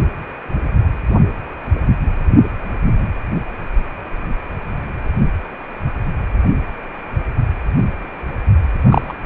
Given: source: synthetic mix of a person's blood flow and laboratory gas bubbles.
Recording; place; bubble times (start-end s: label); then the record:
Doppler ultrasound of blood flow; precordium
8.81-9.16 s: bubbles
From the record:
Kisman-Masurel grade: 123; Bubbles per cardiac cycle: 1 to 2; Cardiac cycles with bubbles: 10 to 50%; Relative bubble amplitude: loud (0.450 to 0.775); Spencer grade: 2 (many but less than half of the cardiac periods contain bubble signals, singularly or in groups); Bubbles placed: only in the low amplitude regions of the cardiac cycle